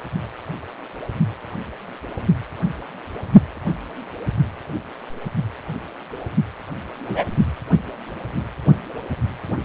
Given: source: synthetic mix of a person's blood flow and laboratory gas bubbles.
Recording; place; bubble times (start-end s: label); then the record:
Doppler ultrasound of blood flow; precordium
7.05-7.24 s: bubbles
From the record:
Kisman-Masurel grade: 113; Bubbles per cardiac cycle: 1 to 2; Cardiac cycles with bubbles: 1 to 10%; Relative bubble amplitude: loud (0.450 to 0.775); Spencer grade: 1 (occasional bubble signal discernible with the cardiac motion signal, with majority of cardiac periods free of bubbles); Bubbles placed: anywhere in the cardiac cycle